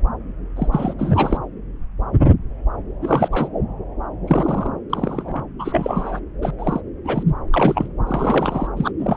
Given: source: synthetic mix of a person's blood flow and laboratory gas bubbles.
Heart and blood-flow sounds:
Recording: Doppler ultrasound of blood flow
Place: subclavian vein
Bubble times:
0.56-0.68 s: bubbles
0.71-0.94 s: bubbles
0.98-1.38 s: bubbles
3.02-3.28 s: bubbles
3.31-3.49 s: bubbles
4.27-4.71 s: bubbles
4.90-5.44 s: bubbles
5.58-6.20 s: bubbles
6.42-6.52 s: bubbles
6.58-6.80 s: bubbles
7.04-7.23 s: bubbles
7.27-7.33 s: bubbles
7.52-7.88 s: bubbles
8.07-8.67 s: bubbles
8.77-8.91 s: bubbles
8.98-9.17 s: bubbles
From the record:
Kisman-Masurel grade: 232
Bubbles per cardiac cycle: several, 3 to 8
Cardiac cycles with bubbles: 50 to 99%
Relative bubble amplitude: moderate (0.250 to 0.450)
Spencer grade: 3 (all of the cardiac periods contain showers or single bubble signals, but not dominating or overriding the cardiac motion signals)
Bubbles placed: anywhere in the cardiac cycle

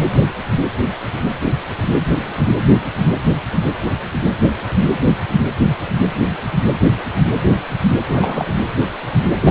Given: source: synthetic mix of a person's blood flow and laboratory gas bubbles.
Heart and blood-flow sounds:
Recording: Doppler ultrasound of blood flow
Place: precordium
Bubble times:
8.09-8.45 s: bubbles
9.44-9.51 s: bubbles
From the record:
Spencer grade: 2 (many but less than half of the cardiac periods contain bubble signals, singularly or in groups)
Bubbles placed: anywhere in the cardiac cycle

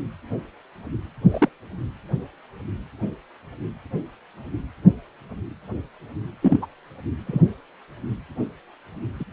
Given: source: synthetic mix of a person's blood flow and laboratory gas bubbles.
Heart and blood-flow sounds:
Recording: Doppler ultrasound of blood flow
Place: precordium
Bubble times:
1.30-1.48 s: bubbles
6.42-6.58 s: bubbles
6.62-6.66 s: bubbles
7.26-7.42 s: bubbles
9.20-9.24 s: bubbles
From the record:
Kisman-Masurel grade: 122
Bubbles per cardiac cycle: 1 to 2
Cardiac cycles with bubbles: 10 to 50%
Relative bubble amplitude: moderate (0.250 to 0.450)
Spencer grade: 2 (many but less than half of the cardiac periods contain bubble signals, singularly or in groups)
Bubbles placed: anywhere in the cardiac cycle

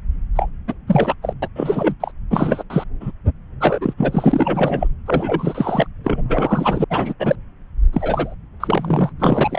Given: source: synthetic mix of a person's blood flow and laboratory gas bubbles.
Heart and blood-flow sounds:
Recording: Doppler ultrasound of blood flow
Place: subclavian vein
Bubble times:
0.35-0.50 s: bubbles
0.68-0.73 s: bubbles
0.88-1.15 s: bubbles
1.22-1.34 s: bubbles
1.42-1.48 s: bubbles
1.55-1.95 s: bubbles
2.00-2.12 s: bubbles
2.31-2.63 s: bubbles
2.70-2.84 s: bubbles
3.01-3.12 s: bubbles
3.60-3.94 s: bubbles
3.98-4.88 s: bubbles
5.06-5.87 s: bubbles
6.04-6.84 s: bubbles
6.90-7.13 s: bubbles
7.20-7.36 s: bubbles
7.92-8.34 s: bubbles
8.60-9.12 s: bubbles
9.19-9.59 s: bubbles
From the record:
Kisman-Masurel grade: 343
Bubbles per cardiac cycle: rolling drumbeat, 9 or more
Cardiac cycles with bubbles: 100%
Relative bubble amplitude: loud (0.450 to 0.775)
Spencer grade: 3 (all of the cardiac periods contain showers or single bubble signals, but not dominating or overriding the cardiac motion signals)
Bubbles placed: anywhere in the cardiac cycle

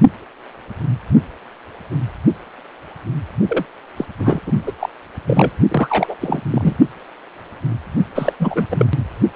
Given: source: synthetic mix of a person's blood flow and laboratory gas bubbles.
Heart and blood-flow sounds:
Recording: Doppler ultrasound of blood flow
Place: precordium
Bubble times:
3.48-3.65 s: bubbles
3.97-4.06 s: bubbles
4.19-4.40 s: bubbles
4.46-4.52 s: bubbles
4.66-4.72 s: bubbles
4.79-4.89 s: bubbles
5.27-5.53 s: bubbles
5.69-6.16 s: bubbles
6.21-6.41 s: bubbles
6.50-6.76 s: bubbles
8.14-8.32 s: bubbles
8.39-8.66 s: bubbles
8.71-8.85 s: bubbles
From the record:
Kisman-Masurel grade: 333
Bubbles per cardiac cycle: rolling drumbeat, 9 or more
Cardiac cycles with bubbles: 50 to 99%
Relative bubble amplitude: loud (0.450 to 0.775)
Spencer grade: 3 (all of the cardiac periods contain showers or single bubble signals, but not dominating or overriding the cardiac motion signals)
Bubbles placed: only in the low amplitude regions of the cardiac cycle

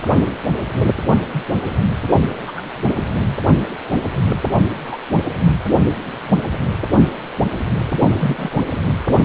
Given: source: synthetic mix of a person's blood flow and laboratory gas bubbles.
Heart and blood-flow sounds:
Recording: Doppler ultrasound of blood flow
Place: precordium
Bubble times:
1.33-1.44 s: bubbles
2.47-2.52 s: bubbles
2.56-2.62 s: bubbles
4.29-4.37 s: bubbles
4.86-4.97 s: bubbles
7.98-8.50 s: bubbles
From the record:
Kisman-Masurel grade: 122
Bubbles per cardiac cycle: 1 to 2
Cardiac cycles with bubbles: 10 to 50%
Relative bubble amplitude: moderate (0.250 to 0.450)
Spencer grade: 2 (many but less than half of the cardiac periods contain bubble signals, singularly or in groups)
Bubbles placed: anywhere in the cardiac cycle

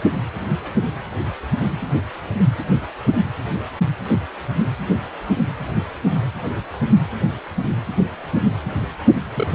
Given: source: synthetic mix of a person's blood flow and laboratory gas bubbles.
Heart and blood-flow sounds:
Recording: Doppler ultrasound of blood flow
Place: precordium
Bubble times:
9.35-9.48 s: bubbles
From the record:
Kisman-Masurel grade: 111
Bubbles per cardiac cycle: 1 to 2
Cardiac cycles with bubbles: 1 to 10%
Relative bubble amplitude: barely perceptible (0.100 to 0.250)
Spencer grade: 1 (occasional bubble signal discernible with the cardiac motion signal, with majority of cardiac periods free of bubbles)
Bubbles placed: anywhere in the cardiac cycle

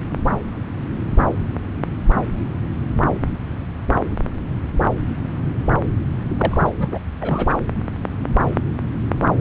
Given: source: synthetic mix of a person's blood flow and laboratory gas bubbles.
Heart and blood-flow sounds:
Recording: Doppler ultrasound of blood flow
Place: subclavian vein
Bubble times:
6.38-6.71 s: bubbles
6.79-6.98 s: bubbles
7.19-7.60 s: bubbles
From the record:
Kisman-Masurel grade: 212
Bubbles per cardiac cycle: several, 3 to 8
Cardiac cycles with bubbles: 1 to 10%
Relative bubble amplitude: moderate (0.250 to 0.450)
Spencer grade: 1 (occasional bubble signal discernible with the cardiac motion signal, with majority of cardiac periods free of bubbles)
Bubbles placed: anywhere in the cardiac cycle

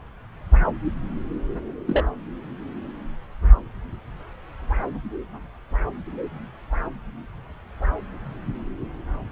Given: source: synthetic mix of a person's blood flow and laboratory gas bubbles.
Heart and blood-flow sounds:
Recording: Doppler ultrasound of blood flow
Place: subclavian vein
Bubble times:
1.87-2.06 s: bubbles
From the record:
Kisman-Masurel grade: 112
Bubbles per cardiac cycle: 1 to 2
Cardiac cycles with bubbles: 1 to 10%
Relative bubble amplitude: moderate (0.250 to 0.450)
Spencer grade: 1 (occasional bubble signal discernible with the cardiac motion signal, with majority of cardiac periods free of bubbles)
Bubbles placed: anywhere in the cardiac cycle

